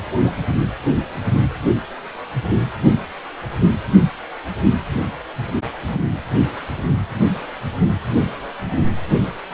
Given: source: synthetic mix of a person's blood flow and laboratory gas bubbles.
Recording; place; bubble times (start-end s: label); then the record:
Doppler ultrasound of blood flow; precordium
0.24-0.34 s: bubbles
From the record:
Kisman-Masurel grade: 113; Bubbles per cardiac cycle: 1 to 2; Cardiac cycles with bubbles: 1 to 10%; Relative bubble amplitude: loud (0.450 to 0.775); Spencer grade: 1 (occasional bubble signal discernible with the cardiac motion signal, with majority of cardiac periods free of bubbles); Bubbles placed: only in the low amplitude regions of the cardiac cycle